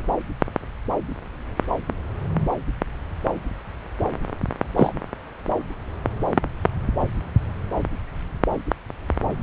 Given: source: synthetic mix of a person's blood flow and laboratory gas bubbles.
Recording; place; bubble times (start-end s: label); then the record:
Doppler ultrasound of blood flow; subclavian vein
4.77-4.93 s: bubbles
From the record:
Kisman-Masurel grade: 113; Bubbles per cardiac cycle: 1 to 2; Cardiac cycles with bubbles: 1 to 10%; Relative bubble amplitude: loud (0.450 to 0.775); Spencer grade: 1 (occasional bubble signal discernible with the cardiac motion signal, with majority of cardiac periods free of bubbles); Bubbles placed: anywhere in the cardiac cycle